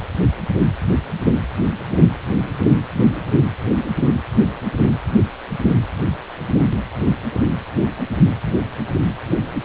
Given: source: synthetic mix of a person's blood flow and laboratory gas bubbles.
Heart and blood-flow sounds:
Doppler ultrasound of blood flow; precordium
no bubbles
From the record:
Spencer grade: 0 (complete lack of bubble signals)

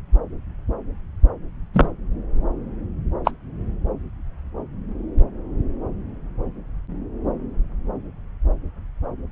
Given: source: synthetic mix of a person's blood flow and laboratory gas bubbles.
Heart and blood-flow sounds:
Doppler ultrasound of blood flow; subclavian vein
1.74-1.89 s: bubbles
3.25-3.31 s: bubbles
From the record:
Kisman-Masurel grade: 113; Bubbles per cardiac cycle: 1 to 2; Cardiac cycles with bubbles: 1 to 10%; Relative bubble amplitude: loud (0.450 to 0.775); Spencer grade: 1 (occasional bubble signal discernible with the cardiac motion signal, with majority of cardiac periods free of bubbles); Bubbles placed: anywhere in the cardiac cycle

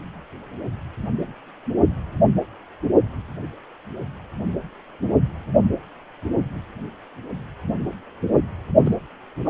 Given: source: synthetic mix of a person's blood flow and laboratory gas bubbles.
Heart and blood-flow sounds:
Doppler ultrasound of blood flow; precordium
8.83-8.97 s: bubbles
9.45-9.50 s: bubbles
From the record:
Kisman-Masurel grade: 211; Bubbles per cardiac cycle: several, 3 to 8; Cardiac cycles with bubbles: 1 to 10%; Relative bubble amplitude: barely perceptible (0.100 to 0.250); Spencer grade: 1 (occasional bubble signal discernible with the cardiac motion signal, with majority of cardiac periods free of bubbles); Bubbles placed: only in the low amplitude regions of the cardiac cycle

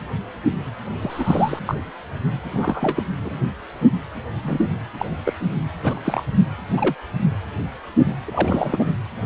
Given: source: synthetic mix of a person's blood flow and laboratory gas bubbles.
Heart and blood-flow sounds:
Doppler ultrasound of blood flow; precordium
1.02-1.59 s: bubbles
1.67-1.74 s: bubbles
2.51-3.03 s: bubbles
3.21-3.45 s: bubbles
4.44-4.67 s: bubbles
4.97-5.05 s: bubbles
5.25-5.34 s: bubbles
5.83-6.00 s: bubbles
6.04-6.23 s: bubbles
6.72-6.95 s: bubbles
8.26-8.85 s: bubbles
From the record:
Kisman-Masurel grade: 232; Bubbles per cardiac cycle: several, 3 to 8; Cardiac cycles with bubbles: 50 to 99%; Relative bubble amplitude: moderate (0.250 to 0.450); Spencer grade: 3 (all of the cardiac periods contain showers or single bubble signals, but not dominating or overriding the cardiac motion signals); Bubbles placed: anywhere in the cardiac cycle

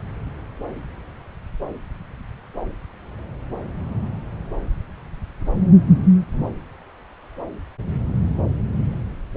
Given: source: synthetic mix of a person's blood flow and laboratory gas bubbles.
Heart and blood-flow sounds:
Doppler ultrasound of blood flow; subclavian vein
no bubbles
From the record:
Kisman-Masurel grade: 000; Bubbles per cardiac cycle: 0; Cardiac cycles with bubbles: 0%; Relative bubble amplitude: no bubbles discernible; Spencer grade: 0 (complete lack of bubble signals)

